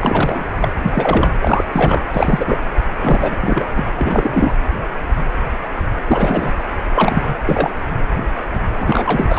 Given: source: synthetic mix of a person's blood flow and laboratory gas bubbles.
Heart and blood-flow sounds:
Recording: Doppler ultrasound of blood flow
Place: precordium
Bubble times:
0.00-0.46 s: bubbles
0.61-0.69 s: bubbles
0.80-1.28 s: bubbles
1.41-1.64 s: bubbles
1.72-2.02 s: bubbles
2.10-2.58 s: bubbles
3.03-3.66 s: bubbles
3.75-3.84 s: bubbles
3.96-4.54 s: bubbles
6.07-6.53 s: bubbles
6.95-7.35 s: bubbles
7.45-7.70 s: bubbles
8.80-9.39 s: bubbles
From the record:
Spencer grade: 3 (all of the cardiac periods contain showers or single bubble signals, but not dominating or overriding the cardiac motion signals)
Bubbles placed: anywhere in the cardiac cycle

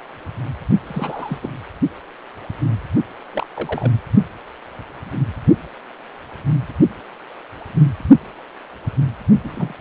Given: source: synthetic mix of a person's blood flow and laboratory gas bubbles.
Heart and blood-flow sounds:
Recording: Doppler ultrasound of blood flow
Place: precordium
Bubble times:
0.86-1.39 s: bubbles
1.43-1.50 s: bubbles
3.33-3.46 s: bubbles
3.56-3.92 s: bubbles
9.43-9.74 s: bubbles
From the record:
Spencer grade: 2 (many but less than half of the cardiac periods contain bubble signals, singularly or in groups)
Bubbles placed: only in the low amplitude regions of the cardiac cycle

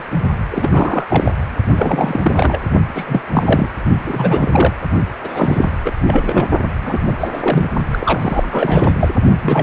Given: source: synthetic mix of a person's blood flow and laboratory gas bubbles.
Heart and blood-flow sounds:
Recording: Doppler ultrasound of blood flow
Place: precordium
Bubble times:
0.00-0.03 s: bubbles
0.51-1.05 s: bubbles
1.09-1.32 s: bubbles
1.75-2.61 s: bubbles
2.94-3.21 s: bubbles
3.32-3.68 s: bubbles
4.04-4.74 s: bubbles
5.20-5.71 s: bubbles
5.85-5.92 s: bubbles
6.07-6.46 s: bubbles
6.82-7.14 s: bubbles
7.20-7.28 s: bubbles
7.33-7.67 s: bubbles
7.92-8.96 s: bubbles
9.00-9.09 s: bubbles
9.41-9.63 s: bubbles
From the record:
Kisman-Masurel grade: 342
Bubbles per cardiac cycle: rolling drumbeat, 9 or more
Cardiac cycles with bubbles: 100%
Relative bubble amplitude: moderate (0.250 to 0.450)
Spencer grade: 3 (all of the cardiac periods contain showers or single bubble signals, but not dominating or overriding the cardiac motion signals)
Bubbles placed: only in the low amplitude regions of the cardiac cycle

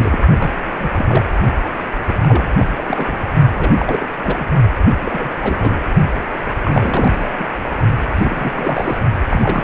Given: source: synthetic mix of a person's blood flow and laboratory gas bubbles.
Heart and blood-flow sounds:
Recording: Doppler ultrasound of blood flow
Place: precordium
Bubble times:
0.00-0.20 s: bubbles
0.40-0.49 s: bubbles
0.78-0.92 s: bubbles
0.97-1.28 s: bubbles
2.07-2.48 s: bubbles
2.58-2.67 s: bubbles
2.76-2.84 s: bubbles
2.87-3.25 s: bubbles
3.55-4.08 s: bubbles
4.23-4.46 s: bubbles
5.01-5.82 s: bubbles
6.64-7.33 s: bubbles
7.38-7.50 s: bubbles
8.14-8.98 s: bubbles
9.29-9.64 s: bubbles
From the record:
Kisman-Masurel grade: 342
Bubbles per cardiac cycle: rolling drumbeat, 9 or more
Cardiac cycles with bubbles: 100%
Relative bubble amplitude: moderate (0.250 to 0.450)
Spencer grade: 3 (all of the cardiac periods contain showers or single bubble signals, but not dominating or overriding the cardiac motion signals)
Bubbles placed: only in the low amplitude regions of the cardiac cycle

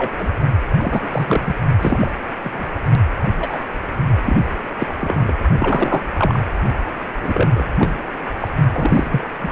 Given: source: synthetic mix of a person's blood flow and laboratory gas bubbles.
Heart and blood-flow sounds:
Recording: Doppler ultrasound of blood flow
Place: precordium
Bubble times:
0.00-0.11 s: bubbles
0.18-0.33 s: bubbles
0.78-1.56 s: bubbles
1.81-2.12 s: bubbles
2.44-2.66 s: bubbles
3.39-3.63 s: bubbles
4.25-4.47 s: bubbles
4.78-4.86 s: bubbles
4.99-5.33 s: bubbles
5.57-6.02 s: bubbles
6.17-6.38 s: bubbles
7.22-7.65 s: bubbles
7.78-8.03 s: bubbles
8.40-8.51 s: bubbles
8.71-9.28 s: bubbles
9.42-9.52 s: bubbles
From the record:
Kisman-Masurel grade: 233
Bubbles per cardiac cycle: several, 3 to 8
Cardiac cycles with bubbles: 50 to 99%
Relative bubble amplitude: loud (0.450 to 0.775)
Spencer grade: 3 (all of the cardiac periods contain showers or single bubble signals, but not dominating or overriding the cardiac motion signals)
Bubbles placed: only in the low amplitude regions of the cardiac cycle

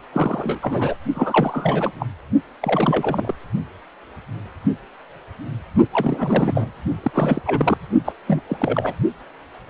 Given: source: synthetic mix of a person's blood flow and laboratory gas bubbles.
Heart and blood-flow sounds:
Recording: Doppler ultrasound of blood flow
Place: precordium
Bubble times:
0.12-0.59 s: bubbles
0.61-0.96 s: bubbles
1.14-1.91 s: bubbles
1.99-2.06 s: bubbles
2.60-3.35 s: bubbles
5.93-6.72 s: bubbles
7.02-7.42 s: bubbles
7.46-7.77 s: bubbles
8.04-8.12 s: bubbles
8.27-8.41 s: bubbles
8.49-8.95 s: bubbles
From the record:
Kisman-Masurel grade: 332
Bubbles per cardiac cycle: rolling drumbeat, 9 or more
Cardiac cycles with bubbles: 50 to 99%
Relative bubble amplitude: moderate (0.250 to 0.450)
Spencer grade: 3 (all of the cardiac periods contain showers or single bubble signals, but not dominating or overriding the cardiac motion signals)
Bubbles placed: only in the low amplitude regions of the cardiac cycle

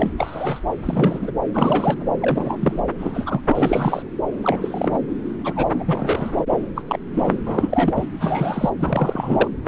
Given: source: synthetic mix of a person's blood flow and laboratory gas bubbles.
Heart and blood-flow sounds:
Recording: Doppler ultrasound of blood flow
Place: subclavian vein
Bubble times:
0.00-0.12 s: bubbles
0.17-0.60 s: bubbles
0.85-1.31 s: bubbles
1.53-2.08 s: bubbles
2.21-2.79 s: bubbles
2.99-3.41 s: bubbles
3.47-4.02 s: bubbles
4.42-4.98 s: bubbles
5.44-5.83 s: bubbles
5.86-6.43 s: bubbles
6.50-6.58 s: bubbles
6.75-6.81 s: bubbles
6.88-6.98 s: bubbles
7.14-7.35 s: bubbles
7.46-7.93 s: bubbles
7.95-8.05 s: bubbles
8.20-8.70 s: bubbles
8.79-9.48 s: bubbles
9.66-9.68 s: bubbles
From the record:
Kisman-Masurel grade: 242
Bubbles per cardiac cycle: several, 3 to 8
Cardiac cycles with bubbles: 100%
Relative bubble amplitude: moderate (0.250 to 0.450)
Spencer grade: 3 (all of the cardiac periods contain showers or single bubble signals, but not dominating or overriding the cardiac motion signals)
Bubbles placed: anywhere in the cardiac cycle

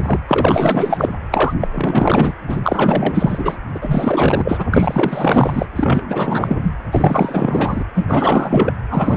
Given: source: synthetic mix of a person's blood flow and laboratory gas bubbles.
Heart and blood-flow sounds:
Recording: Doppler ultrasound of blood flow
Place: precordium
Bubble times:
0.00-0.20 s: bubbles
0.28-1.13 s: bubbles
1.31-1.54 s: bubbles
1.60-1.68 s: bubbles
1.72-2.33 s: bubbles
2.47-3.58 s: bubbles
3.74-4.66 s: bubbles
4.71-5.66 s: bubbles
5.75-6.71 s: bubbles
6.92-7.84 s: bubbles
7.94-8.73 s: bubbles
8.89-9.17 s: bubbles
From the record:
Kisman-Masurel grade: 444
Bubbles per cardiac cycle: continuous sound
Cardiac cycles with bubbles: 100%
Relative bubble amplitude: maximal (0.775 to 0.999)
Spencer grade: 4 (maximum detectable bubble signal sounding continuously throughout systole and diastole of every cardiac period, and overriding the amplitude of the normal cardiac signals)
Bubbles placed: anywhere in the cardiac cycle

